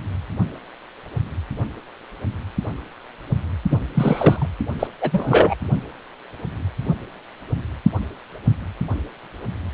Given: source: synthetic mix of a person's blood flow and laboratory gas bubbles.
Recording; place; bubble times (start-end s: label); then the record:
Doppler ultrasound of blood flow; precordium
3.70-3.80 s: bubbles
3.94-4.48 s: bubbles
4.79-4.87 s: bubbles
5.00-5.55 s: bubbles
From the record:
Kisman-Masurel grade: 223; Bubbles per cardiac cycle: several, 3 to 8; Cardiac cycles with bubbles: 10 to 50%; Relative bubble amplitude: loud (0.450 to 0.775); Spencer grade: 2 (many but less than half of the cardiac periods contain bubble signals, singularly or in groups); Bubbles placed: only in the low amplitude regions of the cardiac cycle